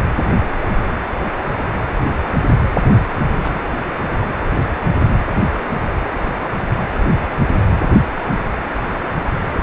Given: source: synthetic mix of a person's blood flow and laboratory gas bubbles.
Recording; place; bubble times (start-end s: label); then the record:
Doppler ultrasound of blood flow; precordium
2.83-3.06 s: bubbles
3.42-3.61 s: bubbles
From the record:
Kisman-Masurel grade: 211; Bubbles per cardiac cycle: several, 3 to 8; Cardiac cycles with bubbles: 1 to 10%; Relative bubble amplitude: barely perceptible (0.100 to 0.250); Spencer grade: 1 (occasional bubble signal discernible with the cardiac motion signal, with majority of cardiac periods free of bubbles); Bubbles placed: anywhere in the cardiac cycle